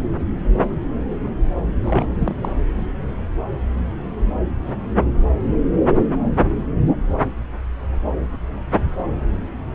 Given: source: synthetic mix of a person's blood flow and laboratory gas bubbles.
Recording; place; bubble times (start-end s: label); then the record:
Doppler ultrasound of blood flow; subclavian vein
1.84-2.10 s: bubbles
2.19-2.35 s: bubbles
2.41-2.52 s: bubbles
From the record:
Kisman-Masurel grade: 212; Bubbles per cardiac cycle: several, 3 to 8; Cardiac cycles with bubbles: 1 to 10%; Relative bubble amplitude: moderate (0.250 to 0.450); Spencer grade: 1 (occasional bubble signal discernible with the cardiac motion signal, with majority of cardiac periods free of bubbles); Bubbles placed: anywhere in the cardiac cycle